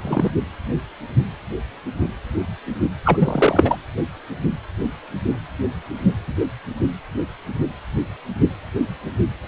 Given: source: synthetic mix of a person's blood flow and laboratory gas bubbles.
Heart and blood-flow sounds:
Doppler ultrasound of blood flow; precordium
0.02-0.31 s: bubbles
3.04-3.77 s: bubbles
From the record:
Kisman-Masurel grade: 223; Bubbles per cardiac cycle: several, 3 to 8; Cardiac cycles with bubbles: 10 to 50%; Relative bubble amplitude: loud (0.450 to 0.775); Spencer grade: 2 (many but less than half of the cardiac periods contain bubble signals, singularly or in groups); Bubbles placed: anywhere in the cardiac cycle

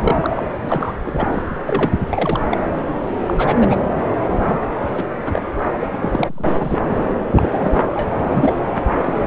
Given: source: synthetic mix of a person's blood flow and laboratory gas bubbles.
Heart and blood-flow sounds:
Doppler ultrasound of blood flow; subclavian vein
0.02-0.45 s: bubbles
0.61-0.94 s: bubbles
1.04-1.12 s: bubbles
1.14-1.42 s: bubbles
1.67-1.91 s: bubbles
2.09-2.43 s: bubbles
2.50-2.58 s: bubbles
3.27-3.34 s: bubbles
3.37-3.81 s: bubbles
4.00-4.05 s: bubbles
4.41-4.58 s: bubbles
4.95-5.04 s: bubbles
5.25-5.42 s: bubbles
5.79-5.88 s: bubbles
6.01-6.51 s: bubbles
6.59-6.79 s: bubbles
7.35-8.16 s: bubbles
8.19-8.54 s: bubbles
8.97-9.26 s: bubbles
From the record:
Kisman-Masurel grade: 242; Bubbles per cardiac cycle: several, 3 to 8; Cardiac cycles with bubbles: 100%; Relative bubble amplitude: moderate (0.250 to 0.450); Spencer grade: 3 (all of the cardiac periods contain showers or single bubble signals, but not dominating or overriding the cardiac motion signals); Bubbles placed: anywhere in the cardiac cycle

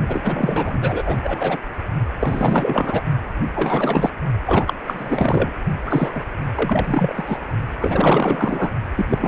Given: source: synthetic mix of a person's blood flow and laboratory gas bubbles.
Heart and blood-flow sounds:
Doppler ultrasound of blood flow; precordium
0.08-1.18 s: bubbles
1.23-1.58 s: bubbles
2.19-3.01 s: bubbles
3.54-4.10 s: bubbles
4.46-4.74 s: bubbles
4.85-5.51 s: bubbles
5.86-6.25 s: bubbles
6.55-7.40 s: bubbles
7.80-8.71 s: bubbles
8.96-9.06 s: bubbles
9.09-9.28 s: bubbles
From the record:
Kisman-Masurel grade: 444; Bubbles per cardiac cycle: continuous sound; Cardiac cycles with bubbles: 100%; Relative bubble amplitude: maximal (0.775 to 0.999); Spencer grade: 4 (maximum detectable bubble signal sounding continuously throughout systole and diastole of every cardiac period, and overriding the amplitude of the normal cardiac signals); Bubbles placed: only in the low amplitude regions of the cardiac cycle

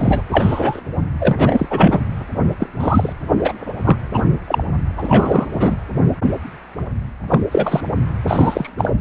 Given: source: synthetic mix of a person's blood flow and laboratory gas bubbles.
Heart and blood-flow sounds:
Doppler ultrasound of blood flow; precordium
0.00-0.22 s: bubbles
0.31-0.80 s: bubbles
1.20-2.00 s: bubbles
2.59-2.68 s: bubbles
2.79-3.13 s: bubbles
3.43-3.53 s: bubbles
3.84-3.96 s: bubbles
4.12-4.23 s: bubbles
4.48-4.63 s: bubbles
4.98-5.47 s: bubbles
5.54-5.76 s: bubbles
7.28-7.41 s: bubbles
7.51-7.81 s: bubbles
8.27-8.69 s: bubbles
8.77-8.93 s: bubbles
From the record:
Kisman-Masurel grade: 233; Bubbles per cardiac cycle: several, 3 to 8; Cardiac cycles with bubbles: 50 to 99%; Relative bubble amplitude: loud (0.450 to 0.775); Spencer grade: 3 (all of the cardiac periods contain showers or single bubble signals, but not dominating or overriding the cardiac motion signals); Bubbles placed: anywhere in the cardiac cycle

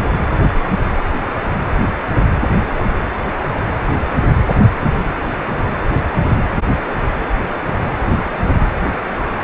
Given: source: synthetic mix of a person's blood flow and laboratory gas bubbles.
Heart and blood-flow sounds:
Doppler ultrasound of blood flow; precordium
no bubbles
From the record:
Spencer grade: 0 (complete lack of bubble signals)

